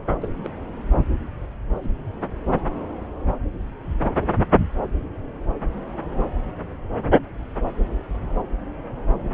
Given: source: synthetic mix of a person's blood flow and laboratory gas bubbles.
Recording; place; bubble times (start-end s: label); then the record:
Doppler ultrasound of blood flow; subclavian vein
0.21-0.29 s: bubbles
0.44-0.48 s: bubbles
1.75-1.89 s: bubbles
From the record:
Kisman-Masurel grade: 121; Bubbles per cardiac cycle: 1 to 2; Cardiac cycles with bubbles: 10 to 50%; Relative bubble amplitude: barely perceptible (0.100 to 0.250); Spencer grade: 2 (many but less than half of the cardiac periods contain bubble signals, singularly or in groups); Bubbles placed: anywhere in the cardiac cycle